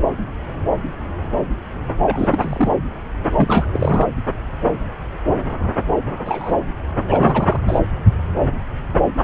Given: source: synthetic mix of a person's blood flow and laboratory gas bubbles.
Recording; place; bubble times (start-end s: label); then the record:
Doppler ultrasound of blood flow; subclavian vein
2.03-2.71 s: bubbles
3.36-3.66 s: bubbles
3.73-4.07 s: bubbles
6.19-6.52 s: bubbles
7.07-7.60 s: bubbles
7.67-7.79 s: bubbles
9.21-9.24 s: bubbles
From the record:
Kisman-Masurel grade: 222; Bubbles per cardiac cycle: several, 3 to 8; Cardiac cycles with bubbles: 10 to 50%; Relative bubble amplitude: moderate (0.250 to 0.450); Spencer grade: 2 (many but less than half of the cardiac periods contain bubble signals, singularly or in groups); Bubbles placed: anywhere in the cardiac cycle